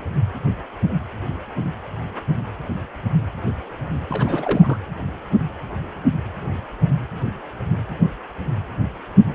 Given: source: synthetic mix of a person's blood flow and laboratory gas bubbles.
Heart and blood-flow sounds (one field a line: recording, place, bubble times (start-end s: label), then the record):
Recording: Doppler ultrasound of blood flow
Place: precordium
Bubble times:
4.09-4.77 s: bubbles
From the record:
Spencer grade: 1 (occasional bubble signal discernible with the cardiac motion signal, with majority of cardiac periods free of bubbles)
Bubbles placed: anywhere in the cardiac cycle